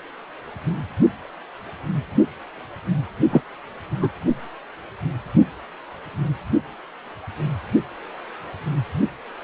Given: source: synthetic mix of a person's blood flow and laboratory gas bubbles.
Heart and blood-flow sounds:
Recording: Doppler ultrasound of blood flow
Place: precordium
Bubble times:
3.30-3.41 s: bubbles
4.00-4.10 s: bubbles
From the record:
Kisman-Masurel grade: 113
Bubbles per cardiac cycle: 1 to 2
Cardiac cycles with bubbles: 1 to 10%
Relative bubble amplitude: loud (0.450 to 0.775)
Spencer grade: 1 (occasional bubble signal discernible with the cardiac motion signal, with majority of cardiac periods free of bubbles)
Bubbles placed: only in the low amplitude regions of the cardiac cycle

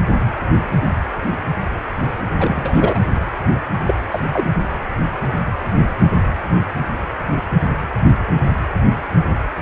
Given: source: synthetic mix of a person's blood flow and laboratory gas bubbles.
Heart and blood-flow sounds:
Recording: Doppler ultrasound of blood flow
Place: precordium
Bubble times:
2.39-3.00 s: bubbles
3.86-3.95 s: bubbles
4.11-4.20 s: bubbles
4.32-4.49 s: bubbles
From the record:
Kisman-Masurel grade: 212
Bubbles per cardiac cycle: several, 3 to 8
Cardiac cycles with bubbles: 1 to 10%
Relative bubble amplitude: moderate (0.250 to 0.450)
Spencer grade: 1 (occasional bubble signal discernible with the cardiac motion signal, with majority of cardiac periods free of bubbles)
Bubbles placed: anywhere in the cardiac cycle

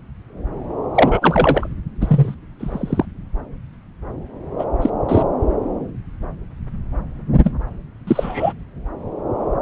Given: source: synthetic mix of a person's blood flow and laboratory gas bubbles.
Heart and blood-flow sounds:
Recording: Doppler ultrasound of blood flow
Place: subclavian vein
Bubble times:
0.95-1.67 s: bubbles
2.00-2.34 s: bubbles
2.59-3.05 s: bubbles
4.58-4.64 s: bubbles
4.81-4.90 s: bubbles
5.08-5.22 s: bubbles
7.44-7.52 s: bubbles
8.07-8.53 s: bubbles
From the record:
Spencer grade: 3 (all of the cardiac periods contain showers or single bubble signals, but not dominating or overriding the cardiac motion signals)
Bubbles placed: anywhere in the cardiac cycle

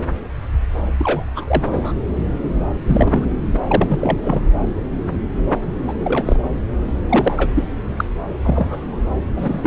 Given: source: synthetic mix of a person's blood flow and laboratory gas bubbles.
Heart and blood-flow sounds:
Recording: Doppler ultrasound of blood flow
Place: subclavian vein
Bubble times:
0.98-1.24 s: bubbles
1.35-1.63 s: bubbles
1.66-1.93 s: bubbles
2.86-3.24 s: bubbles
3.53-3.64 s: bubbles
3.67-4.17 s: bubbles
4.23-4.41 s: bubbles
5.88-5.94 s: bubbles
6.04-6.39 s: bubbles
7.09-7.64 s: bubbles
7.96-8.04 s: bubbles
8.43-9.01 s: bubbles
9.36-9.67 s: bubbles
From the record:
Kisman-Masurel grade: 232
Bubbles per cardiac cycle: several, 3 to 8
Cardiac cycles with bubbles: 50 to 99%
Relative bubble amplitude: moderate (0.250 to 0.450)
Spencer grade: 3 (all of the cardiac periods contain showers or single bubble signals, but not dominating or overriding the cardiac motion signals)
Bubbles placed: anywhere in the cardiac cycle

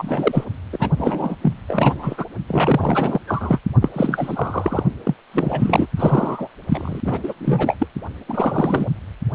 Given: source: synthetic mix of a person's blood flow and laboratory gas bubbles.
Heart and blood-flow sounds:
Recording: Doppler ultrasound of blood flow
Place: precordium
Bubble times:
0.00-0.45 s: bubbles
0.72-0.90 s: bubbles
0.97-1.35 s: bubbles
1.42-1.53 s: bubbles
1.68-2.25 s: bubbles
2.48-3.19 s: bubbles
3.27-3.59 s: bubbles
3.82-3.89 s: bubbles
3.92-4.83 s: bubbles
5.04-5.15 s: bubbles
5.33-5.87 s: bubbles
5.97-6.48 s: bubbles
6.68-7.00 s: bubbles
7.04-7.34 s: bubbles
7.40-7.86 s: bubbles
8.28-8.90 s: bubbles
From the record:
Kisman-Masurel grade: 333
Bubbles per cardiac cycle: rolling drumbeat, 9 or more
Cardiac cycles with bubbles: 50 to 99%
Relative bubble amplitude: loud (0.450 to 0.775)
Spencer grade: 3 (all of the cardiac periods contain showers or single bubble signals, but not dominating or overriding the cardiac motion signals)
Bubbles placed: only in the low amplitude regions of the cardiac cycle

